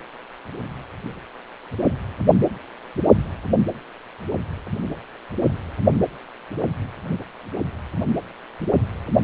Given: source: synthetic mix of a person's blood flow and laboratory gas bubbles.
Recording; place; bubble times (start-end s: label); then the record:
Doppler ultrasound of blood flow; precordium
no bubbles
From the record:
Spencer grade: 0 (complete lack of bubble signals)